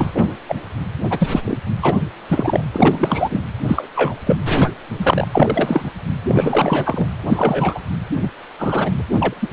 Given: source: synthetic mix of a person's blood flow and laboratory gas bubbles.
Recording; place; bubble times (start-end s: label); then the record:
Doppler ultrasound of blood flow; precordium
0.00-0.11 s: bubbles
0.15-0.23 s: bubbles
0.48-0.55 s: bubbles
1.10-1.29 s: bubbles
1.32-1.40 s: bubbles
1.45-1.58 s: bubbles
1.81-1.97 s: bubbles
2.28-2.61 s: bubbles
2.73-3.42 s: bubbles
3.67-3.90 s: bubbles
3.95-4.16 s: bubbles
4.26-4.36 s: bubbles
4.58-4.71 s: bubbles
4.97-5.27 s: bubbles
5.31-5.92 s: bubbles
6.27-7.07 s: bubbles
7.26-7.80 s: bubbles
8.21-8.30 s: bubbles
8.59-8.91 s: bubbles
8.97-9.02 s: bubbles
9.20-9.34 s: bubbles
9.42-9.48 s: bubbles
From the record:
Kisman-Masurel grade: 243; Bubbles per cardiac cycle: several, 3 to 8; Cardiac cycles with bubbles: 100%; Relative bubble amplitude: loud (0.450 to 0.775); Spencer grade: 3 (all of the cardiac periods contain showers or single bubble signals, but not dominating or overriding the cardiac motion signals); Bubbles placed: anywhere in the cardiac cycle